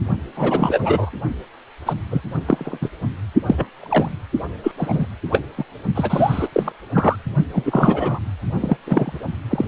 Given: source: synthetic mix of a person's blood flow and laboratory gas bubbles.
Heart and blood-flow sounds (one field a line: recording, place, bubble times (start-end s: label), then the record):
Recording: Doppler ultrasound of blood flow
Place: precordium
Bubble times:
0.36-1.10 s: bubbles
1.86-1.93 s: bubbles
2.10-2.21 s: bubbles
2.46-2.78 s: bubbles
2.81-2.90 s: bubbles
3.46-3.67 s: bubbles
3.78-4.10 s: bubbles
4.63-4.72 s: bubbles
4.77-5.07 s: bubbles
5.31-5.42 s: bubbles
5.57-5.64 s: bubbles
5.94-6.49 s: bubbles
6.52-6.72 s: bubbles
6.93-7.16 s: bubbles
7.53-8.20 s: bubbles
8.60-8.77 s: bubbles
8.86-9.21 s: bubbles
9.50-9.66 s: bubbles
From the record:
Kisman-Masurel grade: 243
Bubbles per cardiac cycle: several, 3 to 8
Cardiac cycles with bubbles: 100%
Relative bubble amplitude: loud (0.450 to 0.775)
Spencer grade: 3 (all of the cardiac periods contain showers or single bubble signals, but not dominating or overriding the cardiac motion signals)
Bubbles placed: only in the low amplitude regions of the cardiac cycle